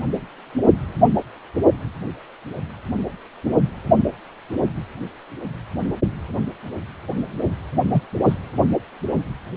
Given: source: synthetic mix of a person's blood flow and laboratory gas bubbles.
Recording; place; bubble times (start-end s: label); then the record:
Doppler ultrasound of blood flow; precordium
7.93-8.01 s: bubbles
8.25-8.34 s: bubbles
From the record:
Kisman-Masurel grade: 113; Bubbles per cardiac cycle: 1 to 2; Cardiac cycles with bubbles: 1 to 10%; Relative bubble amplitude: loud (0.450 to 0.775); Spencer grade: 1 (occasional bubble signal discernible with the cardiac motion signal, with majority of cardiac periods free of bubbles); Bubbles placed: only in the low amplitude regions of the cardiac cycle